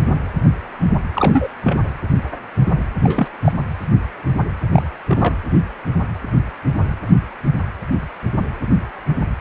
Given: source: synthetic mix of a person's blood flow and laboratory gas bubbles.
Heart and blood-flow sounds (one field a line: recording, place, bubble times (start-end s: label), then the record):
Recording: Doppler ultrasound of blood flow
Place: precordium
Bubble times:
1.15-1.47 s: bubbles
1.63-1.78 s: bubbles
3.03-3.28 s: bubbles
3.42-3.52 s: bubbles
4.72-4.82 s: bubbles
5.07-5.36 s: bubbles
From the record:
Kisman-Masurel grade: 222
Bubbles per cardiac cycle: several, 3 to 8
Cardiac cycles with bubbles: 10 to 50%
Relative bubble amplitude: moderate (0.250 to 0.450)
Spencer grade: 2 (many but less than half of the cardiac periods contain bubble signals, singularly or in groups)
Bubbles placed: anywhere in the cardiac cycle